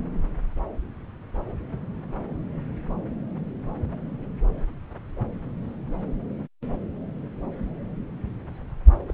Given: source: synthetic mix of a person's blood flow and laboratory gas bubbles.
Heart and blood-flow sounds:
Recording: Doppler ultrasound of blood flow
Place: subclavian vein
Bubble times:
9.07-9.14 s: bubbles
From the record:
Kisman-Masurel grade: 211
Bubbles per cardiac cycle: several, 3 to 8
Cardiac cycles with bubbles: 1 to 10%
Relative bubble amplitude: barely perceptible (0.100 to 0.250)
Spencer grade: 1 (occasional bubble signal discernible with the cardiac motion signal, with majority of cardiac periods free of bubbles)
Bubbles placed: anywhere in the cardiac cycle

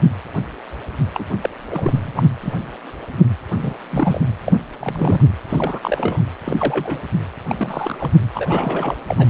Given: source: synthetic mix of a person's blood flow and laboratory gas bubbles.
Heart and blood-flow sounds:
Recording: Doppler ultrasound of blood flow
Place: precordium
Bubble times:
1.14-1.25 s: bubbles
1.42-1.50 s: bubbles
1.70-2.23 s: bubbles
2.41-2.54 s: bubbles
3.54-3.74 s: bubbles
3.90-4.20 s: bubbles
4.45-4.52 s: bubbles
4.79-5.21 s: bubbles
5.48-5.79 s: bubbles
5.82-6.22 s: bubbles
6.45-6.99 s: bubbles
7.48-8.21 s: bubbles
8.34-8.95 s: bubbles
9.08-9.28 s: bubbles
From the record:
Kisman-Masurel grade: 232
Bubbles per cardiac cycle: several, 3 to 8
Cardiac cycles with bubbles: 50 to 99%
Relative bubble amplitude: moderate (0.250 to 0.450)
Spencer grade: 3 (all of the cardiac periods contain showers or single bubble signals, but not dominating or overriding the cardiac motion signals)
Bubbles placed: anywhere in the cardiac cycle

